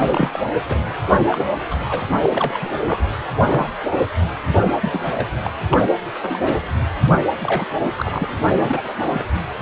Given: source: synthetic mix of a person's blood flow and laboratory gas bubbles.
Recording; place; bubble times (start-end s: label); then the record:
Doppler ultrasound of blood flow; precordium
0.00-0.39 s: bubbles
0.69-0.79 s: bubbles
1.31-1.46 s: bubbles
1.71-2.06 s: bubbles
2.21-2.71 s: bubbles
2.85-3.04 s: bubbles
3.44-3.69 s: bubbles
3.90-3.98 s: bubbles
4.63-4.73 s: bubbles
4.81-5.04 s: bubbles
5.14-5.27 s: bubbles
5.44-5.50 s: bubbles
5.69-5.84 s: bubbles
6.21-6.57 s: bubbles
7.13-7.20 s: bubbles
7.43-7.65 s: bubbles
7.80-7.89 s: bubbles
7.97-8.25 s: bubbles
8.59-8.93 s: bubbles
9.10-9.25 s: bubbles
From the record:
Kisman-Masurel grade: 242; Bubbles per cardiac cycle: several, 3 to 8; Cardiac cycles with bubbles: 100%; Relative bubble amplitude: moderate (0.250 to 0.450); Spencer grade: 3 (all of the cardiac periods contain showers or single bubble signals, but not dominating or overriding the cardiac motion signals); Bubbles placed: anywhere in the cardiac cycle